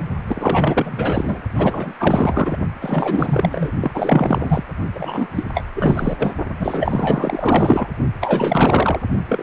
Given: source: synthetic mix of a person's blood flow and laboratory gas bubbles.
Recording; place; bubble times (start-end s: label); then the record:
Doppler ultrasound of blood flow; precordium
0.27-1.42 s: bubbles
1.55-1.92 s: bubbles
1.99-2.57 s: bubbles
2.81-3.73 s: bubbles
3.81-4.64 s: bubbles
4.95-5.27 s: bubbles
5.34-5.43 s: bubbles
5.54-5.64 s: bubbles
5.75-6.34 s: bubbles
6.59-7.88 s: bubbles
8.21-8.99 s: bubbles
9.29-9.43 s: bubbles
From the record:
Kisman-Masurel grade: 444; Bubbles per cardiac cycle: continuous sound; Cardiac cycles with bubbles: 100%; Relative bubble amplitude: maximal (0.775 to 0.999); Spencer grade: 4 (maximum detectable bubble signal sounding continuously throughout systole and diastole of every cardiac period, and overriding the amplitude of the normal cardiac signals); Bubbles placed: only in the low amplitude regions of the cardiac cycle